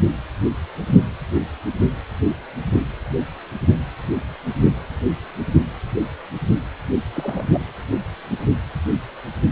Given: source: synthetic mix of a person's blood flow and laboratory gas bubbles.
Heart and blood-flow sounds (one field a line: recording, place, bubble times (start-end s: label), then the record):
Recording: Doppler ultrasound of blood flow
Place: precordium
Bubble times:
7.15-7.45 s: bubbles
7.53-7.61 s: bubbles
From the record:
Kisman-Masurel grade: 211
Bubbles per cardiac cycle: several, 3 to 8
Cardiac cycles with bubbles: 1 to 10%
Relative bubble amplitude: barely perceptible (0.100 to 0.250)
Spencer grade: 1 (occasional bubble signal discernible with the cardiac motion signal, with majority of cardiac periods free of bubbles)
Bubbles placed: anywhere in the cardiac cycle